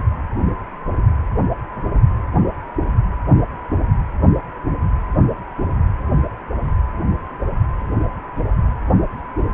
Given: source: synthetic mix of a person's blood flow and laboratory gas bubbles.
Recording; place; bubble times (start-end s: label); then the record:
Doppler ultrasound of blood flow; precordium
no bubbles
From the record:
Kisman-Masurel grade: 000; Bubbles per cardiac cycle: 0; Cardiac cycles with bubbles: 0%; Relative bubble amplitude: no bubbles discernible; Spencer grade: 0 (complete lack of bubble signals)